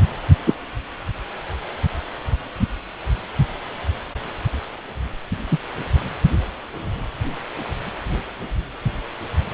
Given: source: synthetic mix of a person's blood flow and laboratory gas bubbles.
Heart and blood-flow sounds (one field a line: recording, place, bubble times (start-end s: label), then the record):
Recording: Doppler ultrasound of blood flow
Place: precordium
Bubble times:
0.46-0.54 s: bubbles
5.51-5.58 s: bubbles
From the record:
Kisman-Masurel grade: 123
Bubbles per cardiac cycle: 1 to 2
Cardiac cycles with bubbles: 10 to 50%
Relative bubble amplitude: loud (0.450 to 0.775)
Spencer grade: 2 (many but less than half of the cardiac periods contain bubble signals, singularly or in groups)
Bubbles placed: anywhere in the cardiac cycle